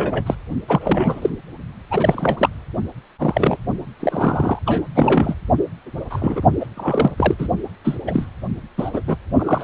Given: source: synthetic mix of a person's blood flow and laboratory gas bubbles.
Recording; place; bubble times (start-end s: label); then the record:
Doppler ultrasound of blood flow; precordium
0.00-0.23 s: bubbles
0.26-0.35 s: bubbles
0.67-1.36 s: bubbles
1.91-2.49 s: bubbles
3.18-3.56 s: bubbles
4.00-4.59 s: bubbles
4.66-4.83 s: bubbles
4.95-5.35 s: bubbles
6.10-6.42 s: bubbles
6.60-6.66 s: bubbles
6.77-7.12 s: bubbles
7.17-7.34 s: bubbles
7.38-7.47 s: bubbles
7.84-7.97 s: bubbles
8.07-8.26 s: bubbles
8.78-8.90 s: bubbles
8.93-9.03 s: bubbles
9.07-9.15 s: bubbles
9.38-9.64 s: bubbles
From the record:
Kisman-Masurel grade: 232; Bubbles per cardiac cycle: several, 3 to 8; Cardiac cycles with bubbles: 50 to 99%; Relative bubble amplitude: moderate (0.250 to 0.450); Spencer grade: 3 (all of the cardiac periods contain showers or single bubble signals, but not dominating or overriding the cardiac motion signals); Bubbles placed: only in the low amplitude regions of the cardiac cycle